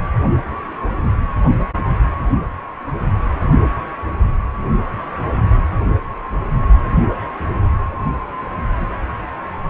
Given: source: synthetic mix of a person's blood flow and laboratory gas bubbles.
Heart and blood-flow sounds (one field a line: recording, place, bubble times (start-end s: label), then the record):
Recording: Doppler ultrasound of blood flow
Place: precordium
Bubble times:
no bubbles
From the record:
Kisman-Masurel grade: 000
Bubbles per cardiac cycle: 0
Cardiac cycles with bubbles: 0%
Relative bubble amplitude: no bubbles discernible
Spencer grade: 0 (complete lack of bubble signals)